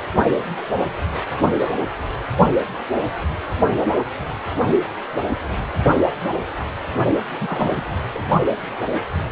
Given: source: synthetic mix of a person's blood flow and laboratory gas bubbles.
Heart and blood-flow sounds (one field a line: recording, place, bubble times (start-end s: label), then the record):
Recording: Doppler ultrasound of blood flow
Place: precordium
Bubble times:
7.39-7.83 s: bubbles
8.14-8.22 s: bubbles
From the record:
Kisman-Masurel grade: 222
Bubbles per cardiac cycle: several, 3 to 8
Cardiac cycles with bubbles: 10 to 50%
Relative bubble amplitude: moderate (0.250 to 0.450)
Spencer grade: 2 (many but less than half of the cardiac periods contain bubble signals, singularly or in groups)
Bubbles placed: only in the low amplitude regions of the cardiac cycle